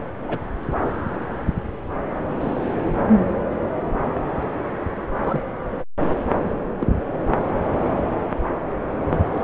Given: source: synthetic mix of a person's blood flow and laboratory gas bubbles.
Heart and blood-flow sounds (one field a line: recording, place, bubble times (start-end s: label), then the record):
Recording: Doppler ultrasound of blood flow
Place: subclavian vein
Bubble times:
0.24-0.38 s: bubbles
2.38-2.76 s: bubbles
5.23-5.43 s: bubbles
6.78-6.92 s: bubbles
From the record:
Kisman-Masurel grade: 122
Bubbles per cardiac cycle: 1 to 2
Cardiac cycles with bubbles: 10 to 50%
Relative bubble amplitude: moderate (0.250 to 0.450)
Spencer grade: 2 (many but less than half of the cardiac periods contain bubble signals, singularly or in groups)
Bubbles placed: anywhere in the cardiac cycle